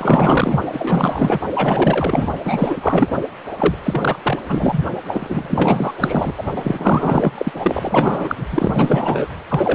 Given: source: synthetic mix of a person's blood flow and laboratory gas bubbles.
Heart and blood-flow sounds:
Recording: Doppler ultrasound of blood flow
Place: precordium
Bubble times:
0.00-0.60 s: bubbles
0.73-1.40 s: bubbles
1.53-2.33 s: bubbles
2.44-3.22 s: bubbles
3.57-3.74 s: bubbles
3.83-4.19 s: bubbles
4.23-4.40 s: bubbles
4.48-4.87 s: bubbles
5.08-5.93 s: bubbles
6.00-6.33 s: bubbles
6.37-6.43 s: bubbles
6.57-7.31 s: bubbles
7.38-7.52 s: bubbles
7.56-8.48 s: bubbles
8.51-9.30 s: bubbles
9.48-9.75 s: bubbles
From the record:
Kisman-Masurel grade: 444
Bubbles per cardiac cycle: continuous sound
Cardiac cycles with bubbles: 100%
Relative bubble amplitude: maximal (0.775 to 0.999)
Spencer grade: 4 (maximum detectable bubble signal sounding continuously throughout systole and diastole of every cardiac period, and overriding the amplitude of the normal cardiac signals)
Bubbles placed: anywhere in the cardiac cycle

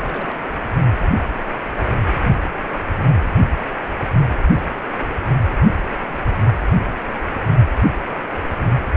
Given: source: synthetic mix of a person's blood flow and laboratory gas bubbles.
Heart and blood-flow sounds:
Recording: Doppler ultrasound of blood flow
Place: precordium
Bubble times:
0.05-0.43 s: bubbles
0.46-0.48 s: bubbles
From the record:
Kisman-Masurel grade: 111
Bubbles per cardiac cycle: 1 to 2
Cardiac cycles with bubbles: 1 to 10%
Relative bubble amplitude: barely perceptible (0.100 to 0.250)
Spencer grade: 1 (occasional bubble signal discernible with the cardiac motion signal, with majority of cardiac periods free of bubbles)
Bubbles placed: anywhere in the cardiac cycle

